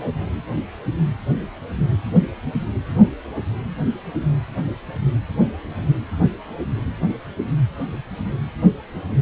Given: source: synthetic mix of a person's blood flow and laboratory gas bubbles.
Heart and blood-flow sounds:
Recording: Doppler ultrasound of blood flow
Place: precordium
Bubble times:
no bubbles
From the record:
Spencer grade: 0 (complete lack of bubble signals)

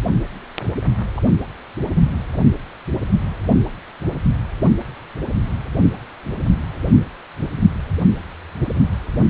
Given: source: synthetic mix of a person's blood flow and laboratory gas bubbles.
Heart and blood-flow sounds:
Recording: Doppler ultrasound of blood flow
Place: precordium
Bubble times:
1.15-1.21 s: bubbles
1.85-2.10 s: bubbles
From the record:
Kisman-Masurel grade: 111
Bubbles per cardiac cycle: 1 to 2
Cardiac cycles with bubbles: 1 to 10%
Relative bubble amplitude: barely perceptible (0.100 to 0.250)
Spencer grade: 1 (occasional bubble signal discernible with the cardiac motion signal, with majority of cardiac periods free of bubbles)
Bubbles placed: anywhere in the cardiac cycle

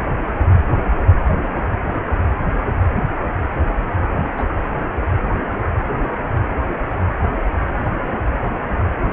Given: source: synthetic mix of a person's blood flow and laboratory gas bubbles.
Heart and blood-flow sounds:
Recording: Doppler ultrasound of blood flow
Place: precordium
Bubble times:
4.38-4.43 s: bubbles
From the record:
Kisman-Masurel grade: 113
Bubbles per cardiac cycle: 1 to 2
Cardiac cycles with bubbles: 1 to 10%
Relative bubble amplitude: loud (0.450 to 0.775)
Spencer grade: 1 (occasional bubble signal discernible with the cardiac motion signal, with majority of cardiac periods free of bubbles)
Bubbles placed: anywhere in the cardiac cycle

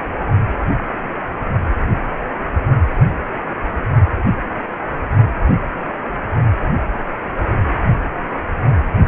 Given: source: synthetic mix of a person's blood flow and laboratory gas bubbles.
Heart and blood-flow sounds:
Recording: Doppler ultrasound of blood flow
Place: precordium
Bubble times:
2.89-2.99 s: bubbles
4.44-4.52 s: bubbles
From the record:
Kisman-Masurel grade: 121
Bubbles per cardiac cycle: 1 to 2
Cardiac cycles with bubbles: 10 to 50%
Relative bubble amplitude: barely perceptible (0.100 to 0.250)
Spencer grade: 2 (many but less than half of the cardiac periods contain bubble signals, singularly or in groups)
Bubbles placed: only in the low amplitude regions of the cardiac cycle

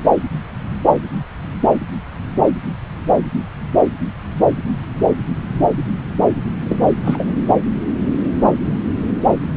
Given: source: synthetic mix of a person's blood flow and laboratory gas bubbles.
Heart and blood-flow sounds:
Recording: Doppler ultrasound of blood flow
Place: subclavian vein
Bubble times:
6.69-6.79 s: bubbles
7.04-7.33 s: bubbles
7.49-7.54 s: bubbles
From the record:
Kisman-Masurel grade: 223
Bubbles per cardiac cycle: several, 3 to 8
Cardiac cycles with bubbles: 10 to 50%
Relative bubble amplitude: loud (0.450 to 0.775)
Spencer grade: 2 (many but less than half of the cardiac periods contain bubble signals, singularly or in groups)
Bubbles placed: anywhere in the cardiac cycle

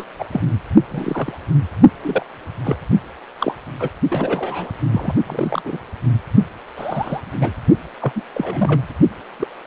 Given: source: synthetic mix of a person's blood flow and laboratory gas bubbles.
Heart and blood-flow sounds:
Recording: Doppler ultrasound of blood flow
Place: precordium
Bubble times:
0.00-0.04 s: bubbles
0.19-0.25 s: bubbles
0.31-0.42 s: bubbles
0.91-1.32 s: bubbles
2.02-2.26 s: bubbles
2.64-2.76 s: bubbles
3.40-3.55 s: bubbles
3.80-3.89 s: bubbles
4.09-4.71 s: bubbles
4.92-5.13 s: bubbles
5.26-5.62 s: bubbles
5.65-5.79 s: bubbles
6.76-7.21 s: bubbles
7.40-7.51 s: bubbles
8.01-8.12 s: bubbles
8.16-8.23 s: bubbles
8.34-8.81 s: bubbles
9.39-9.48 s: bubbles
From the record:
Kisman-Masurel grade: 242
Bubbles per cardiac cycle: several, 3 to 8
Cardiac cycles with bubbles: 100%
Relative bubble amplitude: moderate (0.250 to 0.450)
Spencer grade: 3 (all of the cardiac periods contain showers or single bubble signals, but not dominating or overriding the cardiac motion signals)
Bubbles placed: only in the low amplitude regions of the cardiac cycle

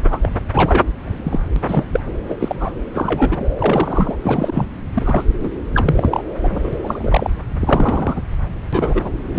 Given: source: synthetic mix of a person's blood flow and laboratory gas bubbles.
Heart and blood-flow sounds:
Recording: Doppler ultrasound of blood flow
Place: subclavian vein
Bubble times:
0.10-0.19 s: bubbles
0.22-0.31 s: bubbles
0.51-0.84 s: bubbles
0.97-1.48 s: bubbles
1.56-1.61 s: bubbles
1.68-1.85 s: bubbles
1.93-2.00 s: bubbles
2.29-2.35 s: bubbles
2.40-2.71 s: bubbles
2.94-3.46 s: bubbles
3.58-4.16 s: bubbles
4.22-4.67 s: bubbles
4.94-5.25 s: bubbles
5.39-5.50 s: bubbles
5.75-6.23 s: bubbles
6.41-6.70 s: bubbles
6.73-6.76 s: bubbles
6.83-7.33 s: bubbles
7.59-8.21 s: bubbles
8.72-9.10 s: bubbles
9.33-9.39 s: bubbles
From the record:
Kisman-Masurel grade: 242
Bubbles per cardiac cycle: several, 3 to 8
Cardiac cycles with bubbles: 100%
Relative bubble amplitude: moderate (0.250 to 0.450)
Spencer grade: 3 (all of the cardiac periods contain showers or single bubble signals, but not dominating or overriding the cardiac motion signals)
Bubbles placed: anywhere in the cardiac cycle

